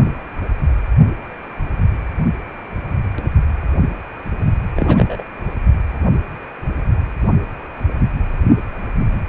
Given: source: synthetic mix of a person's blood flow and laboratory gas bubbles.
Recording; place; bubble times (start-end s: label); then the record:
Doppler ultrasound of blood flow; precordium
4.76-5.25 s: bubbles
From the record:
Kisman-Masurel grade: 222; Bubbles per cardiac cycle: several, 3 to 8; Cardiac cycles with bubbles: 10 to 50%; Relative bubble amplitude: moderate (0.250 to 0.450); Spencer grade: 2 (many but less than half of the cardiac periods contain bubble signals, singularly or in groups); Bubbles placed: only in the low amplitude regions of the cardiac cycle